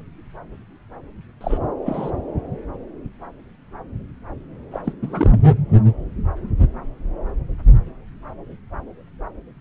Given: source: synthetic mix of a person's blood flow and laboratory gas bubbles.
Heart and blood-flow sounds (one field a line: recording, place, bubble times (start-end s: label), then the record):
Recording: Doppler ultrasound of blood flow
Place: subclavian vein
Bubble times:
1.41-1.58 s: bubbles
1.85-2.11 s: bubbles
4.71-4.93 s: bubbles
5.02-5.41 s: bubbles
5.44-5.49 s: bubbles
From the record:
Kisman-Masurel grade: 222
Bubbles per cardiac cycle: several, 3 to 8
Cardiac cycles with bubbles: 10 to 50%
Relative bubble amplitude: moderate (0.250 to 0.450)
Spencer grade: 2 (many but less than half of the cardiac periods contain bubble signals, singularly or in groups)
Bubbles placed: anywhere in the cardiac cycle